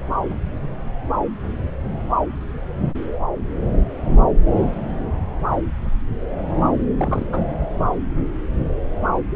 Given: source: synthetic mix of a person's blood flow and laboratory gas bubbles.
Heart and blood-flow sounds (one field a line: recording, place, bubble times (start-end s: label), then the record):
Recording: Doppler ultrasound of blood flow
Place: subclavian vein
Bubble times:
6.98-7.25 s: bubbles
7.32-7.40 s: bubbles
From the record:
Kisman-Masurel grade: 112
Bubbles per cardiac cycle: 1 to 2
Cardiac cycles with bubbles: 1 to 10%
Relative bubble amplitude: moderate (0.250 to 0.450)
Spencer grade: 1 (occasional bubble signal discernible with the cardiac motion signal, with majority of cardiac periods free of bubbles)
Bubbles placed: anywhere in the cardiac cycle